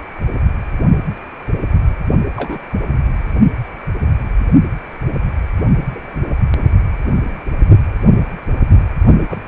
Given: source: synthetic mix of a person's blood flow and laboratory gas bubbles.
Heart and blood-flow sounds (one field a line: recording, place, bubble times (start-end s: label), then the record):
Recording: Doppler ultrasound of blood flow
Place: precordium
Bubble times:
2.36-2.59 s: bubbles
5.93-6.26 s: bubbles
9.29-9.38 s: bubbles
From the record:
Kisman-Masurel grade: 122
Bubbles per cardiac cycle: 1 to 2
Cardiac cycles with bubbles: 10 to 50%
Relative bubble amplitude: moderate (0.250 to 0.450)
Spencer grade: 2 (many but less than half of the cardiac periods contain bubble signals, singularly or in groups)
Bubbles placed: only in the low amplitude regions of the cardiac cycle